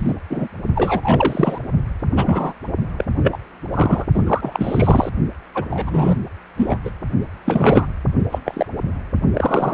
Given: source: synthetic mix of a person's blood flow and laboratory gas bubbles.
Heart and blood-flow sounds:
Doppler ultrasound of blood flow; precordium
0.00-0.14 s: bubbles
0.30-0.47 s: bubbles
0.75-1.58 s: bubbles
2.16-2.53 s: bubbles
2.98-3.04 s: bubbles
3.23-3.38 s: bubbles
3.73-4.05 s: bubbles
4.14-4.22 s: bubbles
4.26-5.09 s: bubbles
5.54-5.65 s: bubbles
5.70-6.17 s: bubbles
6.56-6.78 s: bubbles
6.84-6.90 s: bubbles
7.44-7.87 s: bubbles
8.31-8.39 s: bubbles
8.45-8.66 s: bubbles
9.33-9.74 s: bubbles
From the record:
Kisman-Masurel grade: 243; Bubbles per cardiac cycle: several, 3 to 8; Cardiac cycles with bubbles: 100%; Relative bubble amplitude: loud (0.450 to 0.775); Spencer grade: 3 (all of the cardiac periods contain showers or single bubble signals, but not dominating or overriding the cardiac motion signals); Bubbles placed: only in the low amplitude regions of the cardiac cycle

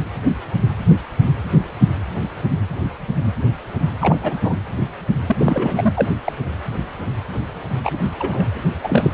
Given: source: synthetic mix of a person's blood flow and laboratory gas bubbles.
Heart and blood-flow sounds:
Doppler ultrasound of blood flow; precordium
4.01-4.56 s: bubbles
5.27-5.93 s: bubbles
5.96-6.09 s: bubbles
6.24-6.32 s: bubbles
7.83-7.90 s: bubbles
8.17-8.60 s: bubbles
8.83-9.12 s: bubbles
From the record:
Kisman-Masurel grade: 223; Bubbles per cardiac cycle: several, 3 to 8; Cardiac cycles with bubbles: 10 to 50%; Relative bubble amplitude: loud (0.450 to 0.775); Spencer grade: 2 (many but less than half of the cardiac periods contain bubble signals, singularly or in groups); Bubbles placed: anywhere in the cardiac cycle

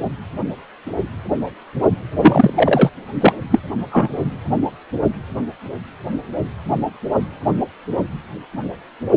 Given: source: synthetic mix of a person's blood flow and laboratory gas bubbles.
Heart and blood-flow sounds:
Doppler ultrasound of blood flow; precordium
2.20-2.54 s: bubbles
2.56-2.89 s: bubbles
3.21-3.33 s: bubbles
3.50-3.59 s: bubbles
3.92-4.09 s: bubbles
From the record:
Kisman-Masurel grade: 223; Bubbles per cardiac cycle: several, 3 to 8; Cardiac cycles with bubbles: 10 to 50%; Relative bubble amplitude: loud (0.450 to 0.775); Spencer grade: 2 (many but less than half of the cardiac periods contain bubble signals, singularly or in groups); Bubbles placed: only in the low amplitude regions of the cardiac cycle

